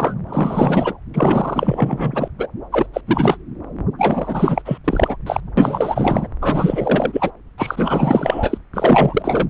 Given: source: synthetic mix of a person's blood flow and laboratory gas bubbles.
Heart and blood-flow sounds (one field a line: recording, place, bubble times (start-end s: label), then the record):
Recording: Doppler ultrasound of blood flow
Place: subclavian vein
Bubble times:
0.00-0.14 s: bubbles
0.27-0.94 s: bubbles
1.14-2.28 s: bubbles
2.38-2.46 s: bubbles
2.71-2.86 s: bubbles
2.93-3.01 s: bubbles
3.06-3.38 s: bubbles
3.98-4.62 s: bubbles
4.65-4.78 s: bubbles
4.84-5.17 s: bubbles
5.26-5.41 s: bubbles
5.57-6.28 s: bubbles
6.41-7.31 s: bubbles
7.58-8.58 s: bubbles
8.73-9.47 s: bubbles
From the record:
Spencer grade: 4 (maximum detectable bubble signal sounding continuously throughout systole and diastole of every cardiac period, and overriding the amplitude of the normal cardiac signals)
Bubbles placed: anywhere in the cardiac cycle